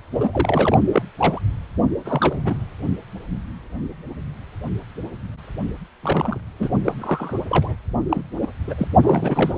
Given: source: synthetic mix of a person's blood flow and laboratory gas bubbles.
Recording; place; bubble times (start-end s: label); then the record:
Doppler ultrasound of blood flow; precordium
0.11-0.29 s: bubbles
0.33-0.77 s: bubbles
0.93-1.02 s: bubbles
1.17-1.42 s: bubbles
2.05-2.42 s: bubbles
2.45-2.58 s: bubbles
6.02-6.41 s: bubbles
6.58-6.69 s: bubbles
6.84-6.94 s: bubbles
7.00-7.38 s: bubbles
7.48-7.75 s: bubbles
8.09-8.23 s: bubbles
8.42-8.47 s: bubbles
8.67-8.74 s: bubbles
8.78-8.88 s: bubbles
9.03-9.58 s: bubbles
From the record:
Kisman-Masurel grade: 232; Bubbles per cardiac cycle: several, 3 to 8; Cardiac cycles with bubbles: 50 to 99%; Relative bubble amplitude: moderate (0.250 to 0.450); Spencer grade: 3 (all of the cardiac periods contain showers or single bubble signals, but not dominating or overriding the cardiac motion signals); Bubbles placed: only in the low amplitude regions of the cardiac cycle